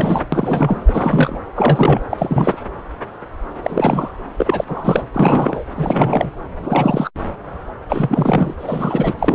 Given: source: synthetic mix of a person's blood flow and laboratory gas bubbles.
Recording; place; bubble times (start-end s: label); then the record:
Doppler ultrasound of blood flow; subclavian vein
0.00-0.26 s: bubbles
0.32-0.83 s: bubbles
0.87-1.41 s: bubbles
1.55-2.00 s: bubbles
2.09-2.58 s: bubbles
3.62-4.12 s: bubbles
4.38-4.64 s: bubbles
4.68-5.02 s: bubbles
5.13-5.64 s: bubbles
5.77-6.30 s: bubbles
6.62-7.10 s: bubbles
7.88-8.54 s: bubbles
8.59-9.15 s: bubbles
9.19-9.35 s: bubbles
From the record:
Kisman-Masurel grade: 333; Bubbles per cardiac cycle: rolling drumbeat, 9 or more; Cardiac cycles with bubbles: 50 to 99%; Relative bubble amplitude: loud (0.450 to 0.775); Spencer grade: 3 (all of the cardiac periods contain showers or single bubble signals, but not dominating or overriding the cardiac motion signals); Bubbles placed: anywhere in the cardiac cycle